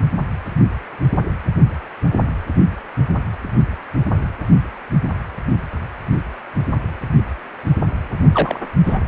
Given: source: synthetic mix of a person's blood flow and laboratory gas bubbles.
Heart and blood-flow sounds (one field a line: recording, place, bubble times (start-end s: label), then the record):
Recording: Doppler ultrasound of blood flow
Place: precordium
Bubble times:
8.32-8.60 s: bubbles
8.86-8.99 s: bubbles
From the record:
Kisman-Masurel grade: 112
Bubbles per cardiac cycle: 1 to 2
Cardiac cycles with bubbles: 1 to 10%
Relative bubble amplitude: moderate (0.250 to 0.450)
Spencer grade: 1 (occasional bubble signal discernible with the cardiac motion signal, with majority of cardiac periods free of bubbles)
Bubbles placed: only in the low amplitude regions of the cardiac cycle